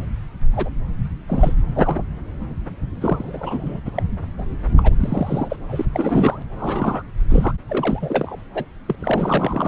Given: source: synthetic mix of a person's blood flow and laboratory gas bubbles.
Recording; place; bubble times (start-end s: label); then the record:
Doppler ultrasound of blood flow; subclavian vein
0.53-0.70 s: bubbles
1.27-1.54 s: bubbles
1.67-1.95 s: bubbles
3.01-3.80 s: bubbles
3.85-3.91 s: bubbles
3.95-4.03 s: bubbles
4.38-4.45 s: bubbles
4.77-4.95 s: bubbles
5.00-5.56 s: bubbles
5.69-5.85 s: bubbles
5.93-6.43 s: bubbles
6.58-7.03 s: bubbles
7.30-7.53 s: bubbles
7.68-8.43 s: bubbles
8.54-8.64 s: bubbles
8.88-8.96 s: bubbles
8.99-9.67 s: bubbles
From the record:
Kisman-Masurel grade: 332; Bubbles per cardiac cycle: rolling drumbeat, 9 or more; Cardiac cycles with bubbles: 50 to 99%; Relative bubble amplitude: moderate (0.250 to 0.450); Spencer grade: 3 (all of the cardiac periods contain showers or single bubble signals, but not dominating or overriding the cardiac motion signals); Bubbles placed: anywhere in the cardiac cycle